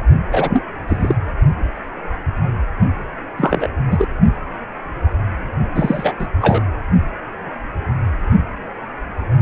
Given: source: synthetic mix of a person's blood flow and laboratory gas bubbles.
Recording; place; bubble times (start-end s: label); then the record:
Doppler ultrasound of blood flow; precordium
0.31-0.63 s: bubbles
0.87-1.15 s: bubbles
3.37-3.67 s: bubbles
3.91-4.08 s: bubbles
5.75-6.14 s: bubbles
6.19-6.28 s: bubbles
6.42-6.61 s: bubbles
From the record:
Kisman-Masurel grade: 223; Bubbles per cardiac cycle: several, 3 to 8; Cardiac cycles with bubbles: 10 to 50%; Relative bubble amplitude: loud (0.450 to 0.775); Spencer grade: 2 (many but less than half of the cardiac periods contain bubble signals, singularly or in groups); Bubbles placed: only in the low amplitude regions of the cardiac cycle